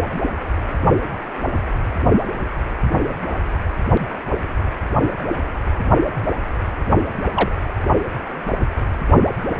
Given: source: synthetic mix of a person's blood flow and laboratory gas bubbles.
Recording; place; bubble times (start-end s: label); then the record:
Doppler ultrasound of blood flow; precordium
7.36-7.49 s: bubbles
From the record:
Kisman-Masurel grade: 112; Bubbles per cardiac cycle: 1 to 2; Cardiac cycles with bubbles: 1 to 10%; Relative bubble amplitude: moderate (0.250 to 0.450); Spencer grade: 1 (occasional bubble signal discernible with the cardiac motion signal, with majority of cardiac periods free of bubbles); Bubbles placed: only in the low amplitude regions of the cardiac cycle